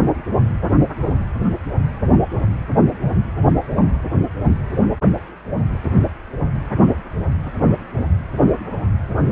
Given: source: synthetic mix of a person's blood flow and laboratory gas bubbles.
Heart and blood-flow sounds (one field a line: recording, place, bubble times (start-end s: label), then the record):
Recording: Doppler ultrasound of blood flow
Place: precordium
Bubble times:
no bubbles
From the record:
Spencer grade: 0 (complete lack of bubble signals)